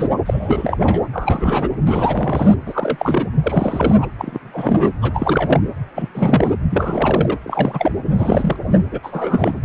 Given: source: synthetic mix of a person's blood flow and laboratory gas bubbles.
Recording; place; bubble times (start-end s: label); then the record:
Doppler ultrasound of blood flow; precordium
0.00-0.08 s: bubbles
0.26-1.02 s: bubbles
1.13-1.70 s: bubbles
1.85-2.54 s: bubbles
2.66-3.31 s: bubbles
3.43-4.06 s: bubbles
4.18-4.92 s: bubbles
5.01-5.60 s: bubbles
5.95-6.09 s: bubbles
6.14-6.54 s: bubbles
6.70-7.36 s: bubbles
7.44-7.92 s: bubbles
8.13-8.56 s: bubbles
8.68-8.78 s: bubbles
8.91-8.99 s: bubbles
9.03-9.60 s: bubbles
From the record:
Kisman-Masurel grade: 343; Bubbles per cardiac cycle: rolling drumbeat, 9 or more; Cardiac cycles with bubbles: 100%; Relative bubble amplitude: loud (0.450 to 0.775); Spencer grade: 3 (all of the cardiac periods contain showers or single bubble signals, but not dominating or overriding the cardiac motion signals); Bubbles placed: anywhere in the cardiac cycle